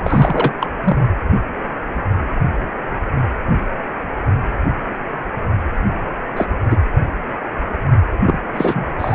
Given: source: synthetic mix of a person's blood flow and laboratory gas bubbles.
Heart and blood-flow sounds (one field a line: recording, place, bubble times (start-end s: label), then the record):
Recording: Doppler ultrasound of blood flow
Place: precordium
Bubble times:
0.03-0.53 s: bubbles
0.60-0.68 s: bubbles
0.83-0.98 s: bubbles
6.36-6.47 s: bubbles
6.70-6.76 s: bubbles
8.21-8.42 s: bubbles
8.54-8.88 s: bubbles
8.98-9.15 s: bubbles
From the record:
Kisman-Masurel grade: 223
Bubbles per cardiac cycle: several, 3 to 8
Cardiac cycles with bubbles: 10 to 50%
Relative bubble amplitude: loud (0.450 to 0.775)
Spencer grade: 2 (many but less than half of the cardiac periods contain bubble signals, singularly or in groups)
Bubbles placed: anywhere in the cardiac cycle